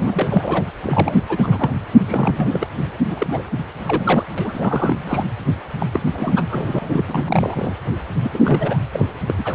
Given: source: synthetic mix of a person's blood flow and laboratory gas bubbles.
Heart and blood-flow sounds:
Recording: Doppler ultrasound of blood flow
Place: precordium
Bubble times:
0.00-0.64 s: bubbles
0.83-1.19 s: bubbles
1.28-1.71 s: bubbles
1.91-2.66 s: bubbles
2.77-2.84 s: bubbles
3.09-3.43 s: bubbles
3.85-4.25 s: bubbles
4.38-5.25 s: bubbles
5.79-5.87 s: bubbles
5.92-6.00 s: bubbles
6.13-6.43 s: bubbles
6.49-7.03 s: bubbles
7.08-7.75 s: bubbles
8.23-8.30 s: bubbles
8.33-8.39 s: bubbles
8.43-8.77 s: bubbles
8.92-9.05 s: bubbles
9.28-9.34 s: bubbles
9.38-9.55 s: bubbles
From the record:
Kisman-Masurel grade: 342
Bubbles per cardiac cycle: rolling drumbeat, 9 or more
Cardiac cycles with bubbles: 100%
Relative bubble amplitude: moderate (0.250 to 0.450)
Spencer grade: 3 (all of the cardiac periods contain showers or single bubble signals, but not dominating or overriding the cardiac motion signals)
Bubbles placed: anywhere in the cardiac cycle

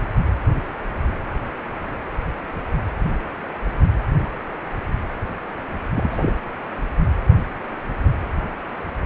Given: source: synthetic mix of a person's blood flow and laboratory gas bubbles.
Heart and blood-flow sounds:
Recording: Doppler ultrasound of blood flow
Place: precordium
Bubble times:
5.95-6.31 s: bubbles
From the record:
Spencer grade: 2 (many but less than half of the cardiac periods contain bubble signals, singularly or in groups)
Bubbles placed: anywhere in the cardiac cycle

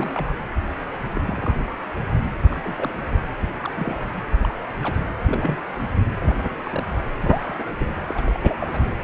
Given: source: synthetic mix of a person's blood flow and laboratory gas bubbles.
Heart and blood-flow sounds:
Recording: Doppler ultrasound of blood flow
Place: precordium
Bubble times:
0.00-0.33 s: bubbles
1.15-1.22 s: bubbles
1.27-1.53 s: bubbles
2.50-2.59 s: bubbles
2.65-2.92 s: bubbles
3.41-3.48 s: bubbles
3.62-4.00 s: bubbles
4.29-4.53 s: bubbles
4.82-5.05 s: bubbles
5.23-5.62 s: bubbles
5.76-5.87 s: bubbles
6.17-6.56 s: bubbles
6.63-6.83 s: bubbles
7.21-7.56 s: bubbles
7.58-7.64 s: bubbles
7.78-7.87 s: bubbles
8.07-8.41 s: bubbles
8.44-8.56 s: bubbles
8.60-8.79 s: bubbles
From the record:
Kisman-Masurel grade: 242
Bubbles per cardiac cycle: several, 3 to 8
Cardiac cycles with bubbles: 100%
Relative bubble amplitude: moderate (0.250 to 0.450)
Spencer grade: 3 (all of the cardiac periods contain showers or single bubble signals, but not dominating or overriding the cardiac motion signals)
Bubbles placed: anywhere in the cardiac cycle

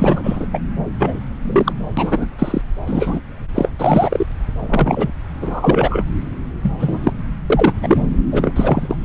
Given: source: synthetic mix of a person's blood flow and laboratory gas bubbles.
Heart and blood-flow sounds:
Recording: Doppler ultrasound of blood flow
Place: subclavian vein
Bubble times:
0.00-0.47 s: bubbles
0.53-0.59 s: bubbles
0.99-1.20 s: bubbles
1.42-1.72 s: bubbles
1.97-2.26 s: bubbles
2.38-2.61 s: bubbles
2.87-3.21 s: bubbles
3.54-3.69 s: bubbles
3.79-4.27 s: bubbles
4.59-5.10 s: bubbles
5.41-6.03 s: bubbles
6.62-7.13 s: bubbles
7.50-7.73 s: bubbles
7.77-8.01 s: bubbles
8.31-8.52 s: bubbles
8.55-8.96 s: bubbles
9.01-9.05 s: bubbles
From the record:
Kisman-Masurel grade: 243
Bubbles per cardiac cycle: several, 3 to 8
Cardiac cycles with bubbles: 100%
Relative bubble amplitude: loud (0.450 to 0.775)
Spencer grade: 3 (all of the cardiac periods contain showers or single bubble signals, but not dominating or overriding the cardiac motion signals)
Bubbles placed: anywhere in the cardiac cycle

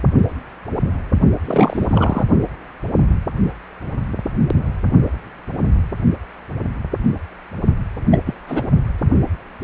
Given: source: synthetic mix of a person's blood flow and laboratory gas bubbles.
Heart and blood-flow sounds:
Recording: Doppler ultrasound of blood flow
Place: precordium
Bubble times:
1.45-2.25 s: bubbles
8.11-8.20 s: bubbles
8.25-8.35 s: bubbles
8.48-8.63 s: bubbles
From the record:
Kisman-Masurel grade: 222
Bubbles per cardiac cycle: several, 3 to 8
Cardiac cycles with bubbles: 10 to 50%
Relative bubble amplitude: moderate (0.250 to 0.450)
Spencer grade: 2 (many but less than half of the cardiac periods contain bubble signals, singularly or in groups)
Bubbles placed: only in the low amplitude regions of the cardiac cycle

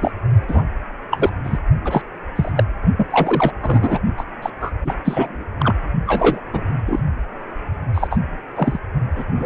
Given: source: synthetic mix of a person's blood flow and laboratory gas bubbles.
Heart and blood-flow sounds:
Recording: Doppler ultrasound of blood flow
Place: precordium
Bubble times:
0.00-0.11 s: bubbles
0.48-0.66 s: bubbles
1.11-1.29 s: bubbles
1.43-1.59 s: bubbles
1.84-2.03 s: bubbles
2.35-2.52 s: bubbles
2.56-2.64 s: bubbles
2.97-3.07 s: bubbles
3.10-3.52 s: bubbles
3.62-4.00 s: bubbles
4.17-4.24 s: bubbles
4.42-4.50 s: bubbles
4.60-4.71 s: bubbles
4.84-4.95 s: bubbles
5.04-5.44 s: bubbles
5.59-5.74 s: bubbles
6.07-6.41 s: bubbles
6.53-6.66 s: bubbles
6.86-7.02 s: bubbles
7.94-8.07 s: bubbles
8.10-8.21 s: bubbles
8.55-8.79 s: bubbles
9.15-9.25 s: bubbles
9.36-9.46 s: bubbles
From the record:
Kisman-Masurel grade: 233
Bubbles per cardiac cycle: several, 3 to 8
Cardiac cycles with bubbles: 50 to 99%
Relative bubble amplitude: loud (0.450 to 0.775)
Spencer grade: 3 (all of the cardiac periods contain showers or single bubble signals, but not dominating or overriding the cardiac motion signals)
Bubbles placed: only in the low amplitude regions of the cardiac cycle

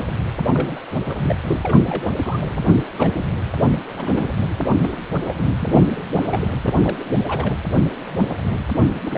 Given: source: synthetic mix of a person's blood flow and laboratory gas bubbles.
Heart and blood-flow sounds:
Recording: Doppler ultrasound of blood flow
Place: precordium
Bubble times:
0.00-0.10 s: bubbles
0.52-0.80 s: bubbles
1.03-1.36 s: bubbles
1.47-1.60 s: bubbles
1.63-1.79 s: bubbles
1.83-2.12 s: bubbles
2.23-2.40 s: bubbles
2.54-2.60 s: bubbles
2.97-3.12 s: bubbles
3.17-3.25 s: bubbles
3.96-4.33 s: bubbles
4.38-4.54 s: bubbles
4.80-5.02 s: bubbles
5.21-5.45 s: bubbles
5.59-5.80 s: bubbles
5.92-6.02 s: bubbles
6.15-6.23 s: bubbles
6.30-6.47 s: bubbles
6.61-6.96 s: bubbles
7.27-7.53 s: bubbles
9.05-9.18 s: bubbles
From the record:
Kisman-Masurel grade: 232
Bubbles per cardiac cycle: several, 3 to 8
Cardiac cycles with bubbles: 50 to 99%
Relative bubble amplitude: moderate (0.250 to 0.450)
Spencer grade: 3 (all of the cardiac periods contain showers or single bubble signals, but not dominating or overriding the cardiac motion signals)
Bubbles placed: anywhere in the cardiac cycle

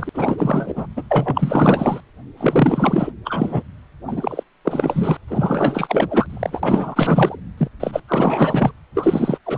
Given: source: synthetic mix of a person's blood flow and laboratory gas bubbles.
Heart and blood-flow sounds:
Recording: Doppler ultrasound of blood flow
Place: precordium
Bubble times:
0.00-0.10 s: bubbles
0.14-0.86 s: bubbles
0.96-1.03 s: bubbles
1.10-2.00 s: bubbles
2.37-3.10 s: bubbles
3.25-3.63 s: bubbles
4.08-4.43 s: bubbles
4.64-5.17 s: bubbles
5.27-6.26 s: bubbles
6.29-7.35 s: bubbles
7.58-7.68 s: bubbles
7.79-8.00 s: bubbles
8.08-8.72 s: bubbles
8.95-9.38 s: bubbles
9.46-9.57 s: bubbles
From the record:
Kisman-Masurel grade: 444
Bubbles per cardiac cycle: continuous sound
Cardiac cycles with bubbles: 100%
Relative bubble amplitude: maximal (0.775 to 0.999)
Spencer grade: 4 (maximum detectable bubble signal sounding continuously throughout systole and diastole of every cardiac period, and overriding the amplitude of the normal cardiac signals)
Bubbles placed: anywhere in the cardiac cycle

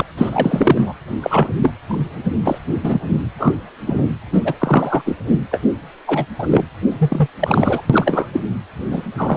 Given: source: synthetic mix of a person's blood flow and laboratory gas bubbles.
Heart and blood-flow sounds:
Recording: Doppler ultrasound of blood flow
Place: precordium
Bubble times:
0.00-0.02 s: bubbles
0.17-0.93 s: bubbles
1.22-1.49 s: bubbles
1.62-1.73 s: bubbles
1.88-2.08 s: bubbles
2.46-2.58 s: bubbles
2.81-2.98 s: bubbles
3.09-3.17 s: bubbles
3.38-3.54 s: bubbles
3.86-4.07 s: bubbles
4.32-4.41 s: bubbles
4.44-4.54 s: bubbles
4.59-5.02 s: bubbles
5.05-5.15 s: bubbles
5.50-5.60 s: bubbles
6.06-6.25 s: bubbles
6.38-6.64 s: bubbles
6.99-7.28 s: bubbles
7.39-7.81 s: bubbles
7.89-8.29 s: bubbles
8.33-8.41 s: bubbles
8.90-9.02 s: bubbles
9.18-9.37 s: bubbles
From the record:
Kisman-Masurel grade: 243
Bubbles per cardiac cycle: several, 3 to 8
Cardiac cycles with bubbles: 100%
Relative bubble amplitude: loud (0.450 to 0.775)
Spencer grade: 3 (all of the cardiac periods contain showers or single bubble signals, but not dominating or overriding the cardiac motion signals)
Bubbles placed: anywhere in the cardiac cycle

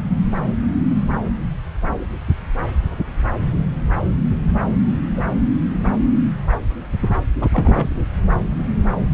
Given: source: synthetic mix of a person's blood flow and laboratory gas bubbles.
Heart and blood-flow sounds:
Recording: Doppler ultrasound of blood flow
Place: subclavian vein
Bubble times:
5.17-5.21 s: bubbles
7.41-7.48 s: bubbles
7.52-8.03 s: bubbles
From the record:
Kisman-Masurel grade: 122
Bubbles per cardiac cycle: 1 to 2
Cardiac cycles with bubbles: 10 to 50%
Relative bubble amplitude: moderate (0.250 to 0.450)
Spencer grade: 2 (many but less than half of the cardiac periods contain bubble signals, singularly or in groups)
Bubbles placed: anywhere in the cardiac cycle

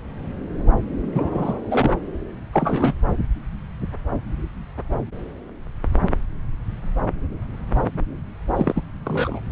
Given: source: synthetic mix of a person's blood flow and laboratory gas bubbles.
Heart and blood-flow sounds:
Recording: Doppler ultrasound of blood flow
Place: subclavian vein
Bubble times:
1.12-1.60 s: bubbles
1.71-1.94 s: bubbles
2.53-2.94 s: bubbles
8.55-8.82 s: bubbles
9.04-9.40 s: bubbles
From the record:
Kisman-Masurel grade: 222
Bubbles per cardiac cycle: several, 3 to 8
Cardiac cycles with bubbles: 10 to 50%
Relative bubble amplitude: moderate (0.250 to 0.450)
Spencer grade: 2 (many but less than half of the cardiac periods contain bubble signals, singularly or in groups)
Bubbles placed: anywhere in the cardiac cycle

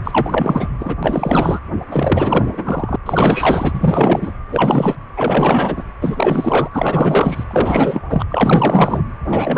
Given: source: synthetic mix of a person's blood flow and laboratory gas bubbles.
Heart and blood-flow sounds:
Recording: Doppler ultrasound of blood flow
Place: precordium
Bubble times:
0.04-0.69 s: bubbles
0.79-0.96 s: bubbles
1.02-1.60 s: bubbles
1.91-2.96 s: bubbles
3.06-4.33 s: bubbles
4.48-4.96 s: bubbles
5.16-5.83 s: bubbles
6.01-7.44 s: bubbles
7.50-8.01 s: bubbles
8.09-8.25 s: bubbles
8.29-9.03 s: bubbles
9.27-9.58 s: bubbles
From the record:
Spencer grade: 4 (maximum detectable bubble signal sounding continuously throughout systole and diastole of every cardiac period, and overriding the amplitude of the normal cardiac signals)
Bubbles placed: anywhere in the cardiac cycle

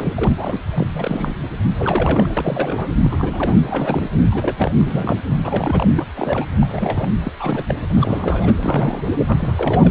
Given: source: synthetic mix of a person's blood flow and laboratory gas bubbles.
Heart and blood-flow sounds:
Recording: Doppler ultrasound of blood flow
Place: precordium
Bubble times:
0.00-0.61 s: bubbles
0.75-1.36 s: bubbles
1.78-2.33 s: bubbles
2.37-2.88 s: bubbles
3.04-4.09 s: bubbles
4.21-4.71 s: bubbles
4.79-5.22 s: bubbles
5.42-6.11 s: bubbles
6.16-6.46 s: bubbles
6.61-7.13 s: bubbles
7.24-7.32 s: bubbles
7.39-7.83 s: bubbles
7.94-8.55 s: bubbles
8.62-9.10 s: bubbles
9.26-9.53 s: bubbles
9.57-9.91 s: bubbles
From the record:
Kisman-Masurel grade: 342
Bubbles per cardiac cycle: rolling drumbeat, 9 or more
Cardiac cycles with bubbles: 100%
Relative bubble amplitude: moderate (0.250 to 0.450)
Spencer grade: 3 (all of the cardiac periods contain showers or single bubble signals, but not dominating or overriding the cardiac motion signals)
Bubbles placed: anywhere in the cardiac cycle

